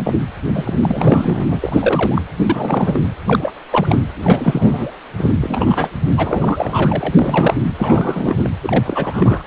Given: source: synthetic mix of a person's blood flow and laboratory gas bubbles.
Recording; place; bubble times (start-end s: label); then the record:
Doppler ultrasound of blood flow; precordium
0.00-0.16 s: bubbles
0.53-1.48 s: bubbles
1.51-2.22 s: bubbles
2.46-3.02 s: bubbles
3.26-3.52 s: bubbles
3.70-3.98 s: bubbles
4.16-4.94 s: bubbles
5.18-5.34 s: bubbles
5.40-5.89 s: bubbles
6.09-7.14 s: bubbles
7.19-7.54 s: bubbles
7.76-8.50 s: bubbles
8.62-9.43 s: bubbles
From the record:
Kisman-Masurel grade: 342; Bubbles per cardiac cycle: rolling drumbeat, 9 or more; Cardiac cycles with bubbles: 100%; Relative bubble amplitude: moderate (0.250 to 0.450); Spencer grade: 3 (all of the cardiac periods contain showers or single bubble signals, but not dominating or overriding the cardiac motion signals); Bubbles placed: anywhere in the cardiac cycle